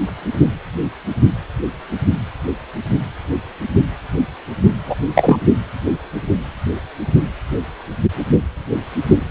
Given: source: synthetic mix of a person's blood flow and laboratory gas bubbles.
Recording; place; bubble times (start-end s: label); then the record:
Doppler ultrasound of blood flow; precordium
4.86-4.96 s: bubbles
5.15-5.39 s: bubbles
From the record:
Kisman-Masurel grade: 213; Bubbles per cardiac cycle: several, 3 to 8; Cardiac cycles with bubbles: 1 to 10%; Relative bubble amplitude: loud (0.450 to 0.775); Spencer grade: 1 (occasional bubble signal discernible with the cardiac motion signal, with majority of cardiac periods free of bubbles); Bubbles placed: only in the low amplitude regions of the cardiac cycle